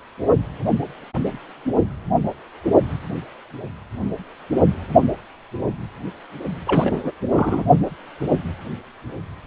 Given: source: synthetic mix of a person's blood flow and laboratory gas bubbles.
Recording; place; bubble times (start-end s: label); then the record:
Doppler ultrasound of blood flow; precordium
6.66-7.12 s: bubbles
7.34-7.64 s: bubbles
From the record:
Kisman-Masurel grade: 222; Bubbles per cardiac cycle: several, 3 to 8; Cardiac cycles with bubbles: 10 to 50%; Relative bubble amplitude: moderate (0.250 to 0.450); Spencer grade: 2 (many but less than half of the cardiac periods contain bubble signals, singularly or in groups); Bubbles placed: only in the low amplitude regions of the cardiac cycle